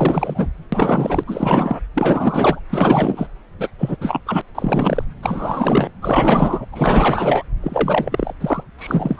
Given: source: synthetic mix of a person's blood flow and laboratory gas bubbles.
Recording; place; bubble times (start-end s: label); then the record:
Doppler ultrasound of blood flow; subclavian vein
0.00-0.51 s: bubbles
0.72-1.23 s: bubbles
1.27-1.79 s: bubbles
1.94-2.60 s: bubbles
2.70-3.27 s: bubbles
3.58-3.69 s: bubbles
3.78-3.97 s: bubbles
4.00-4.21 s: bubbles
4.26-4.42 s: bubbles
4.54-5.04 s: bubbles
5.23-5.91 s: bubbles
6.01-6.65 s: bubbles
6.72-7.44 s: bubbles
7.62-8.32 s: bubbles
8.40-8.63 s: bubbles
8.78-9.20 s: bubbles
From the record:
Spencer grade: 4 (maximum detectable bubble signal sounding continuously throughout systole and diastole of every cardiac period, and overriding the amplitude of the normal cardiac signals); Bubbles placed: anywhere in the cardiac cycle